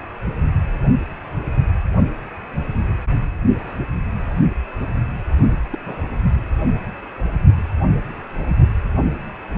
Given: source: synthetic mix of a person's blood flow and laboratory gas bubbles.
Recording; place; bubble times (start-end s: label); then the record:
Doppler ultrasound of blood flow; precordium
5.70-5.78 s: bubbles
5.85-6.09 s: bubbles
From the record:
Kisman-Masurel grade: 121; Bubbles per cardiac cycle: 1 to 2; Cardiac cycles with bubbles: 10 to 50%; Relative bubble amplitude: barely perceptible (0.100 to 0.250); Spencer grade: 2 (many but less than half of the cardiac periods contain bubble signals, singularly or in groups); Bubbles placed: only in the low amplitude regions of the cardiac cycle